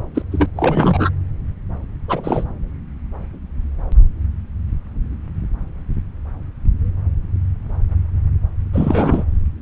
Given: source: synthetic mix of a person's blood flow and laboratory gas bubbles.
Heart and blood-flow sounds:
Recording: Doppler ultrasound of blood flow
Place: subclavian vein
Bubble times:
0.15-0.22 s: bubbles
0.32-0.46 s: bubbles
0.55-1.10 s: bubbles
2.08-2.44 s: bubbles
8.73-9.23 s: bubbles
From the record:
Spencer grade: 2 (many but less than half of the cardiac periods contain bubble signals, singularly or in groups)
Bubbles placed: anywhere in the cardiac cycle

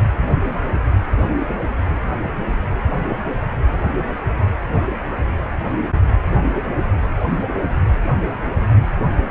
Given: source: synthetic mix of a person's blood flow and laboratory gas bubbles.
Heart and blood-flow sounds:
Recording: Doppler ultrasound of blood flow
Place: precordium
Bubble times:
no bubbles
From the record:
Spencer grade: 0 (complete lack of bubble signals)

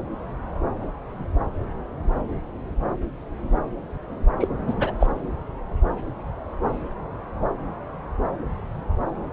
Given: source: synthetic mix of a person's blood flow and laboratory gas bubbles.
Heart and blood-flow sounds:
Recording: Doppler ultrasound of blood flow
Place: subclavian vein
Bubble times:
4.39-4.47 s: bubbles
4.67-4.73 s: bubbles
4.77-4.92 s: bubbles
5.00-5.06 s: bubbles
From the record:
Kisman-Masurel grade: 212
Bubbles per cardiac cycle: several, 3 to 8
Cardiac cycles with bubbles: 1 to 10%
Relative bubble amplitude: moderate (0.250 to 0.450)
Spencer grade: 1 (occasional bubble signal discernible with the cardiac motion signal, with majority of cardiac periods free of bubbles)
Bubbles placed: anywhere in the cardiac cycle

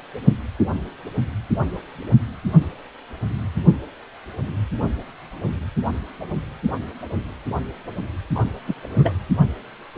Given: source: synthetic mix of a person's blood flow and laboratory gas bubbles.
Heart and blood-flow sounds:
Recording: Doppler ultrasound of blood flow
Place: precordium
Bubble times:
8.35-8.39 s: bubbles
8.67-8.74 s: bubbles
8.81-9.19 s: bubbles
From the record:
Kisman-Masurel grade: 212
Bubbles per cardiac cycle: several, 3 to 8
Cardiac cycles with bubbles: 1 to 10%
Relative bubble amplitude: moderate (0.250 to 0.450)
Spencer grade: 1 (occasional bubble signal discernible with the cardiac motion signal, with majority of cardiac periods free of bubbles)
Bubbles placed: only in the low amplitude regions of the cardiac cycle

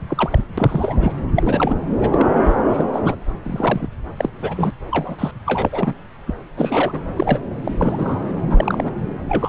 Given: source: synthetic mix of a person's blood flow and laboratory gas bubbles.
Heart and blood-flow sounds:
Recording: Doppler ultrasound of blood flow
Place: subclavian vein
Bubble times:
0.09-0.41 s: bubbles
0.57-1.12 s: bubbles
1.35-1.75 s: bubbles
2.02-2.27 s: bubbles
2.43-2.56 s: bubbles
2.69-2.85 s: bubbles
2.93-3.16 s: bubbles
3.44-3.87 s: bubbles
4.17-4.29 s: bubbles
4.42-4.70 s: bubbles
4.91-5.16 s: bubbles
5.18-5.31 s: bubbles
5.45-5.93 s: bubbles
6.26-6.34 s: bubbles
6.56-7.00 s: bubbles
7.06-7.39 s: bubbles
7.64-7.71 s: bubbles
7.80-8.32 s: bubbles
8.50-8.92 s: bubbles
9.29-9.49 s: bubbles
From the record:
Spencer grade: 3 (all of the cardiac periods contain showers or single bubble signals, but not dominating or overriding the cardiac motion signals)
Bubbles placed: anywhere in the cardiac cycle

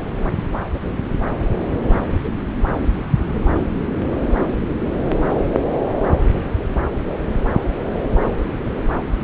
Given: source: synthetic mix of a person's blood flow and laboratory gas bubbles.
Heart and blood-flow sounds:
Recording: Doppler ultrasound of blood flow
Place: subclavian vein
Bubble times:
no bubbles
From the record:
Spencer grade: 0 (complete lack of bubble signals)

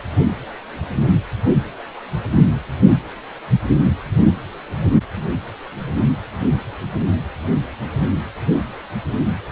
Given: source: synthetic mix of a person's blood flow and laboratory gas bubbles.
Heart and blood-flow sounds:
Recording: Doppler ultrasound of blood flow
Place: precordium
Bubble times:
no bubbles
From the record:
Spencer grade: 0 (complete lack of bubble signals)

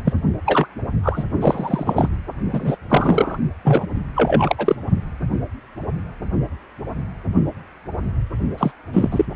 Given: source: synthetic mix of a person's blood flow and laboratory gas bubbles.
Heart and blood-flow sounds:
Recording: Doppler ultrasound of blood flow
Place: precordium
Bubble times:
0.04-0.13 s: bubbles
0.45-0.67 s: bubbles
1.03-1.24 s: bubbles
1.41-2.09 s: bubbles
2.52-2.77 s: bubbles
2.89-3.37 s: bubbles
3.64-3.87 s: bubbles
4.15-4.75 s: bubbles
8.57-8.71 s: bubbles
8.93-9.25 s: bubbles
From the record:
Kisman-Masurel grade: 233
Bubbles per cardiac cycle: several, 3 to 8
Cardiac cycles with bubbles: 50 to 99%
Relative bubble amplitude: loud (0.450 to 0.775)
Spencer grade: 3 (all of the cardiac periods contain showers or single bubble signals, but not dominating or overriding the cardiac motion signals)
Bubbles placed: only in the low amplitude regions of the cardiac cycle

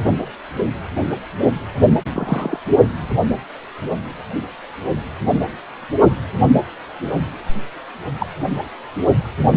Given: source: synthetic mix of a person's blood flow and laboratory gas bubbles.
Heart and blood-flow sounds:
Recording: Doppler ultrasound of blood flow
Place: precordium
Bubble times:
2.12-2.60 s: bubbles
8.20-8.27 s: bubbles
From the record:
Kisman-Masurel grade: 122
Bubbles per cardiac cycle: 1 to 2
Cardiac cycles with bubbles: 10 to 50%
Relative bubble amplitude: moderate (0.250 to 0.450)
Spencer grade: 2 (many but less than half of the cardiac periods contain bubble signals, singularly or in groups)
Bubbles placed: only in the low amplitude regions of the cardiac cycle

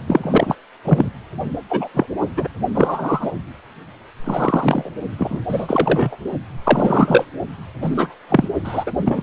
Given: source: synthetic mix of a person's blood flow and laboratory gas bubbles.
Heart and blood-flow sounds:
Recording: Doppler ultrasound of blood flow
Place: precordium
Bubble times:
0.08-0.56 s: bubbles
0.84-1.10 s: bubbles
1.70-1.88 s: bubbles
1.94-2.06 s: bubbles
2.37-2.48 s: bubbles
2.75-3.31 s: bubbles
4.24-4.90 s: bubbles
5.19-5.41 s: bubbles
5.49-6.17 s: bubbles
6.65-7.25 s: bubbles
7.82-8.14 s: bubbles
8.28-8.48 s: bubbles
8.63-8.84 s: bubbles
8.86-8.91 s: bubbles
9.05-9.22 s: bubbles
From the record:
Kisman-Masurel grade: 243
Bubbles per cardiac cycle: several, 3 to 8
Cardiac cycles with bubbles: 100%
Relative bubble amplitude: loud (0.450 to 0.775)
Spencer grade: 3 (all of the cardiac periods contain showers or single bubble signals, but not dominating or overriding the cardiac motion signals)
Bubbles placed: only in the low amplitude regions of the cardiac cycle

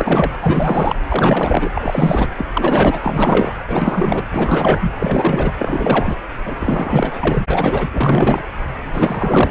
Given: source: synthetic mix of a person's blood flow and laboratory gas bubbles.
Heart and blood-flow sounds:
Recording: Doppler ultrasound of blood flow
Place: precordium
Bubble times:
0.00-0.32 s: bubbles
0.41-0.96 s: bubbles
1.08-2.27 s: bubbles
2.37-2.45 s: bubbles
2.53-2.99 s: bubbles
3.01-3.53 s: bubbles
3.67-4.23 s: bubbles
4.30-4.92 s: bubbles
4.97-5.54 s: bubbles
5.58-6.16 s: bubbles
6.44-6.57 s: bubbles
6.59-7.46 s: bubbles
7.50-8.43 s: bubbles
8.93-9.51 s: bubbles
From the record:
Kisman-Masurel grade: 444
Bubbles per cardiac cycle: continuous sound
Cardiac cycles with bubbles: 100%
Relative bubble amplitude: maximal (0.775 to 0.999)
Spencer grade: 4 (maximum detectable bubble signal sounding continuously throughout systole and diastole of every cardiac period, and overriding the amplitude of the normal cardiac signals)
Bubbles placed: anywhere in the cardiac cycle

